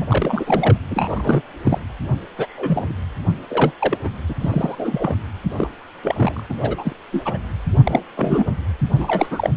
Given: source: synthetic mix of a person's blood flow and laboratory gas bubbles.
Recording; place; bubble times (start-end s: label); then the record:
Doppler ultrasound of blood flow; precordium
0.00-0.77 s: bubbles
0.91-1.42 s: bubbles
1.65-1.79 s: bubbles
2.38-2.94 s: bubbles
3.48-3.71 s: bubbles
3.79-3.98 s: bubbles
4.03-4.10 s: bubbles
4.28-4.34 s: bubbles
4.40-4.75 s: bubbles
4.78-5.23 s: bubbles
5.57-5.69 s: bubbles
6.02-6.41 s: bubbles
6.49-6.54 s: bubbles
6.57-6.92 s: bubbles
7.12-7.38 s: bubbles
7.85-8.03 s: bubbles
8.16-8.45 s: bubbles
8.96-9.50 s: bubbles
From the record:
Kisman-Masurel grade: 242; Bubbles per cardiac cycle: several, 3 to 8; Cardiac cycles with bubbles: 100%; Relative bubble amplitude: moderate (0.250 to 0.450); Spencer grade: 3 (all of the cardiac periods contain showers or single bubble signals, but not dominating or overriding the cardiac motion signals); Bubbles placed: anywhere in the cardiac cycle